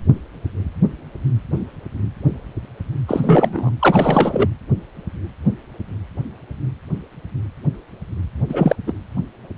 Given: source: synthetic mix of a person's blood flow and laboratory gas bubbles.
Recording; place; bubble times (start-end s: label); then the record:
Doppler ultrasound of blood flow; precordium
3.08-3.71 s: bubbles
3.79-4.49 s: bubbles
8.49-8.76 s: bubbles
8.87-8.93 s: bubbles
From the record:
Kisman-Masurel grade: 223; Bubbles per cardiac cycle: several, 3 to 8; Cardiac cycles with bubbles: 10 to 50%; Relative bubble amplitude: loud (0.450 to 0.775); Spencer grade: 2 (many but less than half of the cardiac periods contain bubble signals, singularly or in groups); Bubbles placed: anywhere in the cardiac cycle